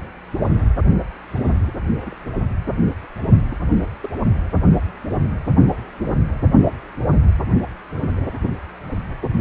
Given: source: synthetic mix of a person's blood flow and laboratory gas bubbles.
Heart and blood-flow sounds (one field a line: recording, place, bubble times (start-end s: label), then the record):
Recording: Doppler ultrasound of blood flow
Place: precordium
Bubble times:
1.30-1.52 s: bubbles
1.67-1.71 s: bubbles
2.00-2.14 s: bubbles
3.50-3.56 s: bubbles
4.02-4.08 s: bubbles
From the record:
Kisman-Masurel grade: 121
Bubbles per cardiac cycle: 1 to 2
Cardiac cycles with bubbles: 10 to 50%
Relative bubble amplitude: barely perceptible (0.100 to 0.250)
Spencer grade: 2 (many but less than half of the cardiac periods contain bubble signals, singularly or in groups)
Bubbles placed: only in the low amplitude regions of the cardiac cycle